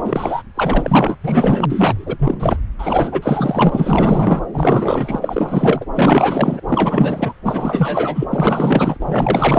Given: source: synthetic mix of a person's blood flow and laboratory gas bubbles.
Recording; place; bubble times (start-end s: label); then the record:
Doppler ultrasound of blood flow; subclavian vein
0.00-0.42 s: bubbles
0.55-1.18 s: bubbles
1.23-1.66 s: bubbles
1.70-2.56 s: bubbles
2.79-4.42 s: bubbles
4.54-5.85 s: bubbles
5.93-6.61 s: bubbles
6.67-7.33 s: bubbles
7.45-8.25 s: bubbles
8.31-8.97 s: bubbles
9.00-9.59 s: bubbles
From the record:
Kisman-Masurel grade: 444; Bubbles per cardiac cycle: continuous sound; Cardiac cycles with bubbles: 100%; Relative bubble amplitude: maximal (0.775 to 0.999); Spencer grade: 4 (maximum detectable bubble signal sounding continuously throughout systole and diastole of every cardiac period, and overriding the amplitude of the normal cardiac signals); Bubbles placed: anywhere in the cardiac cycle